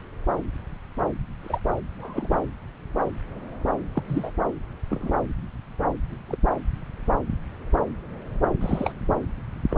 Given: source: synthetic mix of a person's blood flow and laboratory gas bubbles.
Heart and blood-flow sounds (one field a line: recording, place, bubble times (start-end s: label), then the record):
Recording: Doppler ultrasound of blood flow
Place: subclavian vein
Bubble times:
1.43-1.59 s: bubbles
1.99-2.38 s: bubbles
3.94-4.02 s: bubbles
4.07-4.30 s: bubbles
4.90-5.13 s: bubbles
6.29-6.38 s: bubbles
8.61-8.92 s: bubbles
9.70-9.77 s: bubbles
From the record:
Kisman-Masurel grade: 121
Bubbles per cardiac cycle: 1 to 2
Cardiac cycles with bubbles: 10 to 50%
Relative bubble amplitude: barely perceptible (0.100 to 0.250)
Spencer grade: 2 (many but less than half of the cardiac periods contain bubble signals, singularly or in groups)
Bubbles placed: anywhere in the cardiac cycle